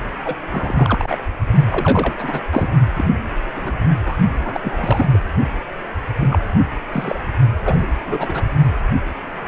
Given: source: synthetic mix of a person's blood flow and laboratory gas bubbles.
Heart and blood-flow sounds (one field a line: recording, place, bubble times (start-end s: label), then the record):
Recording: Doppler ultrasound of blood flow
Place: precordium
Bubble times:
0.24-0.35 s: bubbles
0.50-1.18 s: bubbles
1.69-2.14 s: bubbles
2.19-2.40 s: bubbles
2.51-2.68 s: bubbles
2.96-3.09 s: bubbles
3.55-3.77 s: bubbles
4.05-4.17 s: bubbles
4.39-5.06 s: bubbles
5.12-5.19 s: bubbles
6.21-6.28 s: bubbles
6.30-6.39 s: bubbles
6.92-7.20 s: bubbles
7.62-7.87 s: bubbles
8.06-8.43 s: bubbles
From the record:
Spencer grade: 3 (all of the cardiac periods contain showers or single bubble signals, but not dominating or overriding the cardiac motion signals)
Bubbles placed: only in the low amplitude regions of the cardiac cycle